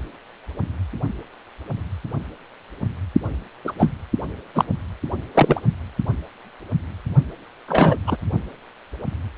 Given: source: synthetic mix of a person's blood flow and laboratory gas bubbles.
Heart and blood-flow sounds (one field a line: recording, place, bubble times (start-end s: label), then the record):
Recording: Doppler ultrasound of blood flow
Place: precordium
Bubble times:
3.65-3.72 s: bubbles
3.78-3.92 s: bubbles
4.55-4.65 s: bubbles
5.35-5.61 s: bubbles
7.68-7.98 s: bubbles
8.07-8.17 s: bubbles
From the record:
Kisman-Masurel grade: 223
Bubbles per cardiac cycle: several, 3 to 8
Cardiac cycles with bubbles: 10 to 50%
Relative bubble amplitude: loud (0.450 to 0.775)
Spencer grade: 2 (many but less than half of the cardiac periods contain bubble signals, singularly or in groups)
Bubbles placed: only in the low amplitude regions of the cardiac cycle